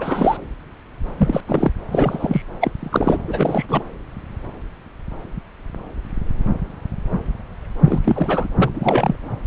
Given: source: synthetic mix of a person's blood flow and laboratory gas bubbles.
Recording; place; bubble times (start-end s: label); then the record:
Doppler ultrasound of blood flow; subclavian vein
0.00-0.37 s: bubbles
1.17-1.41 s: bubbles
1.47-1.72 s: bubbles
1.88-2.42 s: bubbles
2.60-2.72 s: bubbles
2.79-3.18 s: bubbles
3.28-3.66 s: bubbles
3.69-3.83 s: bubbles
7.84-8.47 s: bubbles
8.58-8.71 s: bubbles
8.73-9.15 s: bubbles
From the record:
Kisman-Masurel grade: 332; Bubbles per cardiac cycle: rolling drumbeat, 9 or more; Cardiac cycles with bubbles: 50 to 99%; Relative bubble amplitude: moderate (0.250 to 0.450); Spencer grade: 3 (all of the cardiac periods contain showers or single bubble signals, but not dominating or overriding the cardiac motion signals); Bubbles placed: anywhere in the cardiac cycle